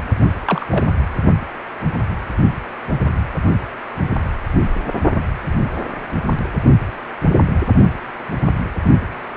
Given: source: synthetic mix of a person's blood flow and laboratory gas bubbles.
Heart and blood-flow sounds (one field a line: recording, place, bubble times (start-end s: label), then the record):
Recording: Doppler ultrasound of blood flow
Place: precordium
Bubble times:
0.45-0.66 s: bubbles
0.70-0.85 s: bubbles
From the record:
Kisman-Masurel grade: 112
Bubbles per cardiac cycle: 1 to 2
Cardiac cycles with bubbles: 1 to 10%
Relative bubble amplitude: moderate (0.250 to 0.450)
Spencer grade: 1 (occasional bubble signal discernible with the cardiac motion signal, with majority of cardiac periods free of bubbles)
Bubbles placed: only in the low amplitude regions of the cardiac cycle